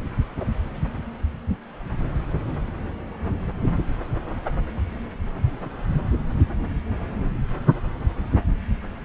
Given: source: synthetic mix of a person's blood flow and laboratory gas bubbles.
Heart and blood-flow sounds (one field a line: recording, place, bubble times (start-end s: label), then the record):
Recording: Doppler ultrasound of blood flow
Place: subclavian vein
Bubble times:
no bubbles
From the record:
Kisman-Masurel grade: 000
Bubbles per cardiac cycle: 0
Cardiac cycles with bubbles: 0%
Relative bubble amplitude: no bubbles discernible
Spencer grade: 0 (complete lack of bubble signals)